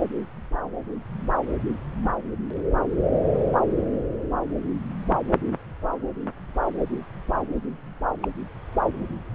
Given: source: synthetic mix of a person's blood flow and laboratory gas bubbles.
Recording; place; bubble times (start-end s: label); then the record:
Doppler ultrasound of blood flow; subclavian vein
8.21-8.28 s: bubbles
From the record:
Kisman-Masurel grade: 111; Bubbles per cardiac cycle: 1 to 2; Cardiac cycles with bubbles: 1 to 10%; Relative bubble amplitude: barely perceptible (0.100 to 0.250); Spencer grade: 1 (occasional bubble signal discernible with the cardiac motion signal, with majority of cardiac periods free of bubbles); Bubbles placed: anywhere in the cardiac cycle